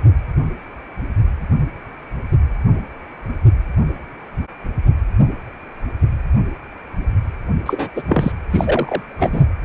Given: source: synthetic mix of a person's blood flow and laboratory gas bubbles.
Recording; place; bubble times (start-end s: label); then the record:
Doppler ultrasound of blood flow; precordium
7.65-7.88 s: bubbles
7.96-8.03 s: bubbles
8.07-8.32 s: bubbles
8.50-9.01 s: bubbles
9.18-9.45 s: bubbles
From the record:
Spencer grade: 2 (many but less than half of the cardiac periods contain bubble signals, singularly or in groups); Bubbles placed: anywhere in the cardiac cycle